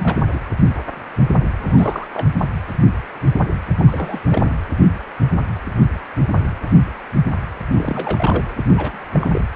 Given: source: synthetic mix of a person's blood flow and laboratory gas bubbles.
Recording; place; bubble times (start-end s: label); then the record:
Doppler ultrasound of blood flow; precordium
0.00-0.18 s: bubbles
0.32-0.40 s: bubbles
1.60-2.08 s: bubbles
2.12-2.28 s: bubbles
2.38-2.48 s: bubbles
3.78-4.20 s: bubbles
4.29-4.50 s: bubbles
7.75-8.44 s: bubbles
8.75-9.03 s: bubbles
9.13-9.45 s: bubbles
From the record:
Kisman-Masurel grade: 222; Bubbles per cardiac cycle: several, 3 to 8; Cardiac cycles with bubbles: 10 to 50%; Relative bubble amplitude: moderate (0.250 to 0.450); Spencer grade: 2 (many but less than half of the cardiac periods contain bubble signals, singularly or in groups); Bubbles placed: anywhere in the cardiac cycle